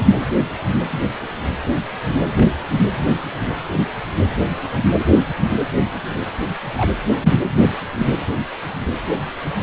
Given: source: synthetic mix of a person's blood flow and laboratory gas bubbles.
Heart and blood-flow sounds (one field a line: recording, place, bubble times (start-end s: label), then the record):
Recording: Doppler ultrasound of blood flow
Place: precordium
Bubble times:
2.33-2.49 s: bubbles
6.77-6.92 s: bubbles
7.22-7.37 s: bubbles
7.94-8.06 s: bubbles
From the record:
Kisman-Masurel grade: 121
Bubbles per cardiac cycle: 1 to 2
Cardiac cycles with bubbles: 10 to 50%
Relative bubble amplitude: barely perceptible (0.100 to 0.250)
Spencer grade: 2 (many but less than half of the cardiac periods contain bubble signals, singularly or in groups)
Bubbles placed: anywhere in the cardiac cycle